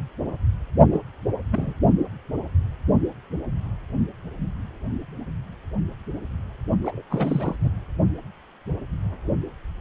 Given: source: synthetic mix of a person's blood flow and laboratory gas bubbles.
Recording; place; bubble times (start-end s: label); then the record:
Doppler ultrasound of blood flow; precordium
0.90-0.99 s: bubbles
1.51-1.73 s: bubbles
6.83-7.02 s: bubbles
7.10-7.56 s: bubbles
7.60-7.69 s: bubbles
From the record:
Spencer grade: 2 (many but less than half of the cardiac periods contain bubble signals, singularly or in groups); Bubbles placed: only in the low amplitude regions of the cardiac cycle